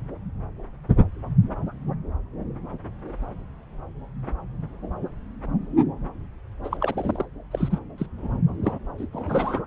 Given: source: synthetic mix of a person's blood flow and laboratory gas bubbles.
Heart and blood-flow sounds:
Doppler ultrasound of blood flow; subclavian vein
6.63-6.77 s: bubbles
6.79-7.25 s: bubbles
7.51-7.79 s: bubbles
7.97-8.06 s: bubbles
8.18-8.40 s: bubbles
8.63-8.79 s: bubbles
8.97-9.07 s: bubbles
9.12-9.61 s: bubbles
From the record:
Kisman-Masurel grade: 222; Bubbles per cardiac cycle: several, 3 to 8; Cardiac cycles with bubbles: 10 to 50%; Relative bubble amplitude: moderate (0.250 to 0.450); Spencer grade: 2 (many but less than half of the cardiac periods contain bubble signals, singularly or in groups); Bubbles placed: anywhere in the cardiac cycle

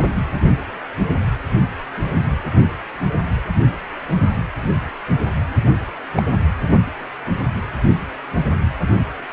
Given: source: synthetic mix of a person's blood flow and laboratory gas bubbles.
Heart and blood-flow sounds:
Doppler ultrasound of blood flow; precordium
6.15-6.23 s: bubbles
From the record:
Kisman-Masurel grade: 122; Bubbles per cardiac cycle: 1 to 2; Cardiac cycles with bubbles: 10 to 50%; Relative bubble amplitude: moderate (0.250 to 0.450); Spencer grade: 2 (many but less than half of the cardiac periods contain bubble signals, singularly or in groups); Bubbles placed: anywhere in the cardiac cycle

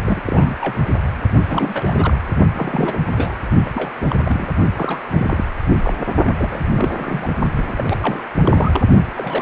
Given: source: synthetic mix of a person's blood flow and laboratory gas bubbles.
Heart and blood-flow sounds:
Doppler ultrasound of blood flow; precordium
0.04-0.21 s: bubbles
0.26-0.56 s: bubbles
0.61-0.79 s: bubbles
1.46-2.17 s: bubbles
2.54-2.99 s: bubbles
3.16-3.35 s: bubbles
3.65-3.70 s: bubbles
3.74-3.91 s: bubbles
4.01-4.21 s: bubbles
4.25-4.48 s: bubbles
4.75-5.01 s: bubbles
5.11-5.44 s: bubbles
5.69-5.74 s: bubbles
5.82-5.93 s: bubbles
6.25-6.33 s: bubbles
6.38-6.60 s: bubbles
6.74-7.30 s: bubbles
7.57-8.24 s: bubbles
8.44-8.80 s: bubbles
9.16-9.42 s: bubbles
From the record:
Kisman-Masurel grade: 342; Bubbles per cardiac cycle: rolling drumbeat, 9 or more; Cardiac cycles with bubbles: 100%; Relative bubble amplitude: moderate (0.250 to 0.450); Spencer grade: 3 (all of the cardiac periods contain showers or single bubble signals, but not dominating or overriding the cardiac motion signals); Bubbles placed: only in the low amplitude regions of the cardiac cycle

